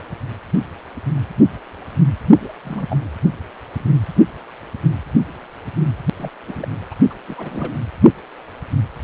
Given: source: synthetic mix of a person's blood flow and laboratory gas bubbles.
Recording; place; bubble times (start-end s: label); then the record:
Doppler ultrasound of blood flow; precordium
2.41-2.49 s: bubbles
2.65-2.86 s: bubbles
2.90-2.96 s: bubbles
6.19-6.29 s: bubbles
6.48-6.68 s: bubbles
6.91-6.95 s: bubbles
7.10-7.16 s: bubbles
7.28-7.73 s: bubbles
From the record:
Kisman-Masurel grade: 221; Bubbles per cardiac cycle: several, 3 to 8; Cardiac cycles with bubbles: 10 to 50%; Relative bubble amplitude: barely perceptible (0.100 to 0.250); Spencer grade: 2 (many but less than half of the cardiac periods contain bubble signals, singularly or in groups); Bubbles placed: only in the low amplitude regions of the cardiac cycle